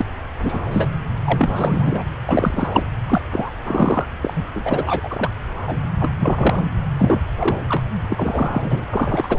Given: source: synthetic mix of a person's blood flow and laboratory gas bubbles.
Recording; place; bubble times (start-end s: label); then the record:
Doppler ultrasound of blood flow; subclavian vein
0.41-0.59 s: bubbles
0.71-0.92 s: bubbles
1.25-2.03 s: bubbles
2.26-2.68 s: bubbles
2.72-2.83 s: bubbles
3.08-3.22 s: bubbles
3.31-3.50 s: bubbles
3.67-4.04 s: bubbles
4.22-4.44 s: bubbles
4.54-5.30 s: bubbles
5.67-5.76 s: bubbles
6.00-6.11 s: bubbles
6.19-6.62 s: bubbles
6.98-7.21 s: bubbles
7.38-7.56 s: bubbles
7.68-7.84 s: bubbles
8.09-8.85 s: bubbles
8.89-9.39 s: bubbles
From the record:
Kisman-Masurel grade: 243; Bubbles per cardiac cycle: several, 3 to 8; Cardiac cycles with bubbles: 100%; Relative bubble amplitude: loud (0.450 to 0.775); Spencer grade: 3 (all of the cardiac periods contain showers or single bubble signals, but not dominating or overriding the cardiac motion signals); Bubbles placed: anywhere in the cardiac cycle